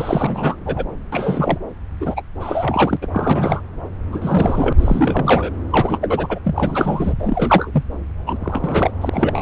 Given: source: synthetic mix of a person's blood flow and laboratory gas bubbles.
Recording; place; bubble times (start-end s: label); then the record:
Doppler ultrasound of blood flow; subclavian vein
0.00-0.57 s: bubbles
0.66-0.84 s: bubbles
1.12-1.58 s: bubbles
2.00-2.22 s: bubbles
2.40-2.97 s: bubbles
3.02-3.08 s: bubbles
3.12-3.61 s: bubbles
4.12-4.73 s: bubbles
4.78-5.50 s: bubbles
5.70-5.98 s: bubbles
6.01-6.38 s: bubbles
6.44-7.13 s: bubbles
7.19-7.83 s: bubbles
8.26-8.38 s: bubbles
8.40-8.91 s: bubbles
9.01-9.42 s: bubbles
From the record:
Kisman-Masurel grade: 342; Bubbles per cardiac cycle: rolling drumbeat, 9 or more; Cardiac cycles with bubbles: 100%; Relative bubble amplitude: moderate (0.250 to 0.450); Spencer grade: 3 (all of the cardiac periods contain showers or single bubble signals, but not dominating or overriding the cardiac motion signals); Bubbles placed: anywhere in the cardiac cycle